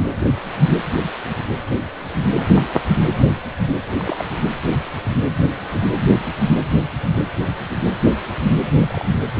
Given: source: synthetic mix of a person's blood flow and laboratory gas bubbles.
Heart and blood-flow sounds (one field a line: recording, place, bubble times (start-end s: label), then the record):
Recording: Doppler ultrasound of blood flow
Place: precordium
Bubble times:
3.22-3.27 s: bubbles
3.97-4.25 s: bubbles
4.67-4.79 s: bubbles
8.66-9.05 s: bubbles
From the record:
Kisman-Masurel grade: 121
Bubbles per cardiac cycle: 1 to 2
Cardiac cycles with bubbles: 10 to 50%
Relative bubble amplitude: barely perceptible (0.100 to 0.250)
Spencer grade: 2 (many but less than half of the cardiac periods contain bubble signals, singularly or in groups)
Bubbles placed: anywhere in the cardiac cycle